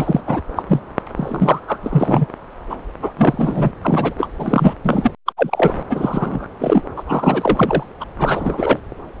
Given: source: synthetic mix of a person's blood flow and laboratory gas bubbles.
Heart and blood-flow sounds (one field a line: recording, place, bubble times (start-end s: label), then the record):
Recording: Doppler ultrasound of blood flow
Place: subclavian vein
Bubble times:
0.00-0.21 s: bubbles
0.27-0.41 s: bubbles
0.55-0.64 s: bubbles
0.68-0.80 s: bubbles
1.16-1.60 s: bubbles
1.67-1.78 s: bubbles
1.83-2.25 s: bubbles
2.69-2.77 s: bubbles
3.02-3.12 s: bubbles
3.17-3.71 s: bubbles
3.82-4.14 s: bubbles
4.18-4.28 s: bubbles
4.38-4.73 s: bubbles
4.85-5.11 s: bubbles
5.26-5.32 s: bubbles
5.37-5.72 s: bubbles
5.89-6.47 s: bubbles
6.59-6.81 s: bubbles
6.96-7.04 s: bubbles
7.06-7.83 s: bubbles
8.00-8.05 s: bubbles
8.18-8.79 s: bubbles
From the record:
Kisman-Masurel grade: 343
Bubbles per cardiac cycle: rolling drumbeat, 9 or more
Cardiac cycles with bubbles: 100%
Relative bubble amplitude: loud (0.450 to 0.775)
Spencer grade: 3 (all of the cardiac periods contain showers or single bubble signals, but not dominating or overriding the cardiac motion signals)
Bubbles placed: anywhere in the cardiac cycle